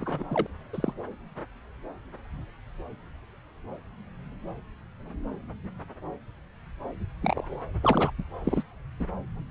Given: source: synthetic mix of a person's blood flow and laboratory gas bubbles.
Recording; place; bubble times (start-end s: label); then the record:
Doppler ultrasound of blood flow; subclavian vein
0.00-0.24 s: bubbles
0.30-0.47 s: bubbles
0.73-0.93 s: bubbles
7.21-7.59 s: bubbles
7.81-8.11 s: bubbles
8.18-8.23 s: bubbles
8.44-8.63 s: bubbles
8.99-9.06 s: bubbles
From the record:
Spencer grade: 2 (many but less than half of the cardiac periods contain bubble signals, singularly or in groups); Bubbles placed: anywhere in the cardiac cycle